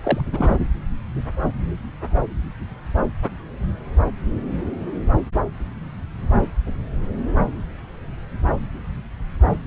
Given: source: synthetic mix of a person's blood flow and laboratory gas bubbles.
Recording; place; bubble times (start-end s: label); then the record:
Doppler ultrasound of blood flow; subclavian vein
0.03-0.21 s: bubbles
0.32-0.57 s: bubbles
From the record:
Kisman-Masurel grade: 212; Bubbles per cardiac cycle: several, 3 to 8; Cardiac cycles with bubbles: 1 to 10%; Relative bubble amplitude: moderate (0.250 to 0.450); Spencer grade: 1 (occasional bubble signal discernible with the cardiac motion signal, with majority of cardiac periods free of bubbles); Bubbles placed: anywhere in the cardiac cycle